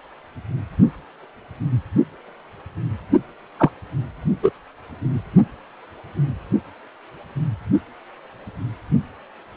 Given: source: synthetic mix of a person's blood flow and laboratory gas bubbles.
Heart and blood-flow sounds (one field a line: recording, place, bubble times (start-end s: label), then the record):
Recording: Doppler ultrasound of blood flow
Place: precordium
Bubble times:
3.58-3.71 s: bubbles
4.42-4.50 s: bubbles
From the record:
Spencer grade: 1 (occasional bubble signal discernible with the cardiac motion signal, with majority of cardiac periods free of bubbles)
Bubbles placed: only in the low amplitude regions of the cardiac cycle